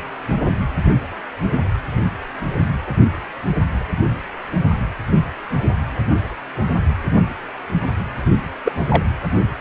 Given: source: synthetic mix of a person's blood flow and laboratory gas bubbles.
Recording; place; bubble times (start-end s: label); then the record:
Doppler ultrasound of blood flow; precordium
8.65-8.72 s: bubbles
8.90-9.03 s: bubbles
From the record:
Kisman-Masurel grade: 123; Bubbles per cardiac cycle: 1 to 2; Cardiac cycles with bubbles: 10 to 50%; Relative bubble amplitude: loud (0.450 to 0.775); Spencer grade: 2 (many but less than half of the cardiac periods contain bubble signals, singularly or in groups); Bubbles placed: anywhere in the cardiac cycle